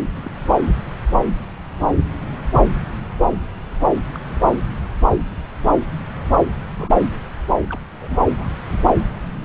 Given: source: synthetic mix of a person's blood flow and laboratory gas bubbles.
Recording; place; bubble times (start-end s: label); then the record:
Doppler ultrasound of blood flow; subclavian vein
0.14-0.34 s: bubbles
4.14-4.18 s: bubbles
4.29-4.42 s: bubbles
6.77-6.92 s: bubbles
7.69-7.79 s: bubbles
7.92-8.18 s: bubbles
8.37-8.48 s: bubbles
From the record:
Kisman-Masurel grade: 121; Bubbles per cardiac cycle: 1 to 2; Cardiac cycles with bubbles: 10 to 50%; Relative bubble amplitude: barely perceptible (0.100 to 0.250); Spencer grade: 2 (many but less than half of the cardiac periods contain bubble signals, singularly or in groups); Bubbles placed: anywhere in the cardiac cycle